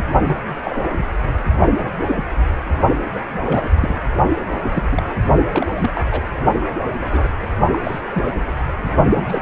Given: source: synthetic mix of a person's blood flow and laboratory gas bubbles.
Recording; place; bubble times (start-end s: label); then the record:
Doppler ultrasound of blood flow; precordium
0.00-0.02 s: bubbles
0.26-0.40 s: bubbles
0.65-0.78 s: bubbles
0.81-1.06 s: bubbles
1.77-1.91 s: bubbles
2.00-2.25 s: bubbles
3.15-3.19 s: bubbles
3.44-4.01 s: bubbles
4.62-4.71 s: bubbles
4.74-4.88 s: bubbles
4.92-5.03 s: bubbles
5.51-5.67 s: bubbles
5.73-5.91 s: bubbles
5.95-6.01 s: bubbles
6.11-6.21 s: bubbles
7.01-7.30 s: bubbles
7.67-7.79 s: bubbles
7.83-8.00 s: bubbles
8.10-8.32 s: bubbles
9.14-9.42 s: bubbles
From the record:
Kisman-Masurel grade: 242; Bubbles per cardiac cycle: several, 3 to 8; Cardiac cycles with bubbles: 100%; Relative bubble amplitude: moderate (0.250 to 0.450); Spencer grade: 3 (all of the cardiac periods contain showers or single bubble signals, but not dominating or overriding the cardiac motion signals); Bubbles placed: only in the low amplitude regions of the cardiac cycle